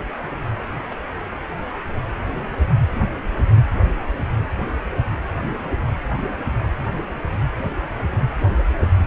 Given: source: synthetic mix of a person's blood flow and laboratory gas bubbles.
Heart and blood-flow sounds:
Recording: Doppler ultrasound of blood flow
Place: precordium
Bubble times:
0.69-0.87 s: bubbles
0.90-0.95 s: bubbles
From the record:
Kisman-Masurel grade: 121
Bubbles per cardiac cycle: 1 to 2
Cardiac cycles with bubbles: 10 to 50%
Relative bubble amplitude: barely perceptible (0.100 to 0.250)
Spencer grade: 2 (many but less than half of the cardiac periods contain bubble signals, singularly or in groups)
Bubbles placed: anywhere in the cardiac cycle

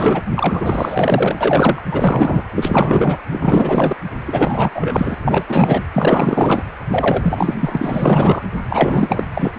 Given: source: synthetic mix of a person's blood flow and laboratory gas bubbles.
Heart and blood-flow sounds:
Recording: Doppler ultrasound of blood flow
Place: precordium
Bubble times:
0.00-0.21 s: bubbles
0.34-1.82 s: bubbles
1.91-2.44 s: bubbles
2.56-3.17 s: bubbles
3.29-3.96 s: bubbles
4.28-4.71 s: bubbles
4.74-5.14 s: bubbles
5.24-5.45 s: bubbles
5.47-5.84 s: bubbles
5.93-6.63 s: bubbles
6.91-7.54 s: bubbles
7.59-8.43 s: bubbles
8.69-9.24 s: bubbles
9.34-9.52 s: bubbles
From the record:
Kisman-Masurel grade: 444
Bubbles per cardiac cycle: continuous sound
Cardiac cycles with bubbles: 100%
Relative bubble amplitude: maximal (0.775 to 0.999)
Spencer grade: 4 (maximum detectable bubble signal sounding continuously throughout systole and diastole of every cardiac period, and overriding the amplitude of the normal cardiac signals)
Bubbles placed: anywhere in the cardiac cycle

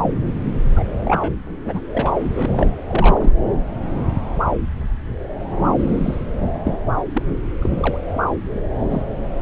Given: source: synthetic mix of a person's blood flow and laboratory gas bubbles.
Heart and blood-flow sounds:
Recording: Doppler ultrasound of blood flow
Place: subclavian vein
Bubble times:
0.00-0.14 s: bubbles
0.75-0.85 s: bubbles
1.04-1.32 s: bubbles
1.65-1.80 s: bubbles
1.93-2.13 s: bubbles
2.18-2.67 s: bubbles
2.88-3.32 s: bubbles
5.79-6.22 s: bubbles
6.64-6.79 s: bubbles
6.96-7.02 s: bubbles
7.13-7.22 s: bubbles
7.62-7.70 s: bubbles
7.78-7.97 s: bubbles
8.54-8.59 s: bubbles
8.89-9.02 s: bubbles
From the record:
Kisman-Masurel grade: 232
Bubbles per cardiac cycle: several, 3 to 8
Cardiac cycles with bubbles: 50 to 99%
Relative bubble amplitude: moderate (0.250 to 0.450)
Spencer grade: 3 (all of the cardiac periods contain showers or single bubble signals, but not dominating or overriding the cardiac motion signals)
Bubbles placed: anywhere in the cardiac cycle

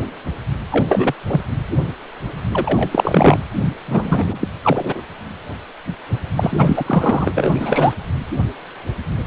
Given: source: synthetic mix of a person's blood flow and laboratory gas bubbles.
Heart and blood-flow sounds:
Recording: Doppler ultrasound of blood flow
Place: precordium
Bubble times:
0.70-1.14 s: bubbles
1.26-1.41 s: bubbles
2.51-3.39 s: bubbles
3.87-4.47 s: bubbles
4.62-5.01 s: bubbles
6.35-7.29 s: bubbles
7.34-7.94 s: bubbles
From the record:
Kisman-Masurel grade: 333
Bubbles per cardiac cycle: rolling drumbeat, 9 or more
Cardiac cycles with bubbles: 50 to 99%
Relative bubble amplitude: loud (0.450 to 0.775)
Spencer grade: 3 (all of the cardiac periods contain showers or single bubble signals, but not dominating or overriding the cardiac motion signals)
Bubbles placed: anywhere in the cardiac cycle

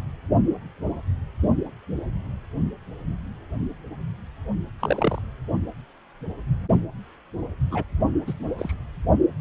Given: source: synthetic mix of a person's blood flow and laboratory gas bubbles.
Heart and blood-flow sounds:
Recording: Doppler ultrasound of blood flow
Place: precordium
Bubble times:
4.79-5.22 s: bubbles
7.71-7.83 s: bubbles
8.26-8.33 s: bubbles
8.57-8.73 s: bubbles
From the record:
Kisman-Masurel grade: 121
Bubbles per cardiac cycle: 1 to 2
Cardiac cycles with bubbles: 10 to 50%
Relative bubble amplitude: barely perceptible (0.100 to 0.250)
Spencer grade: 2 (many but less than half of the cardiac periods contain bubble signals, singularly or in groups)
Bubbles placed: only in the low amplitude regions of the cardiac cycle

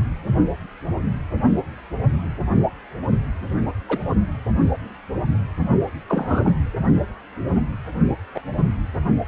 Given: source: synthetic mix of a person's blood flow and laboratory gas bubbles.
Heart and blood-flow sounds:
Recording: Doppler ultrasound of blood flow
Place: precordium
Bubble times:
3.88-3.99 s: bubbles
6.08-6.53 s: bubbles
8.34-8.42 s: bubbles
8.57-8.63 s: bubbles
From the record:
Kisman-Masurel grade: 123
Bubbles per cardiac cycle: 1 to 2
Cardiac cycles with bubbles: 10 to 50%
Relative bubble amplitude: loud (0.450 to 0.775)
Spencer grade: 2 (many but less than half of the cardiac periods contain bubble signals, singularly or in groups)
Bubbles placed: anywhere in the cardiac cycle

